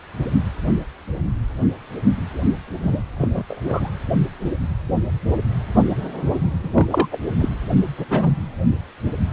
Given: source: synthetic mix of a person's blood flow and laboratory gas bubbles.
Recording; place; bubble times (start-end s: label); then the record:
Doppler ultrasound of blood flow; precordium
2.83-3.03 s: bubbles
3.17-3.43 s: bubbles
3.48-3.89 s: bubbles
6.63-6.70 s: bubbles
6.74-6.87 s: bubbles
6.91-7.08 s: bubbles
7.12-7.18 s: bubbles
7.37-7.49 s: bubbles
7.98-8.06 s: bubbles
8.09-8.31 s: bubbles
From the record:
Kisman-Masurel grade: 222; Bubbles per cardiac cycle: several, 3 to 8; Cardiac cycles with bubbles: 10 to 50%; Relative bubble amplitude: moderate (0.250 to 0.450); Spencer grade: 2 (many but less than half of the cardiac periods contain bubble signals, singularly or in groups); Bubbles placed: anywhere in the cardiac cycle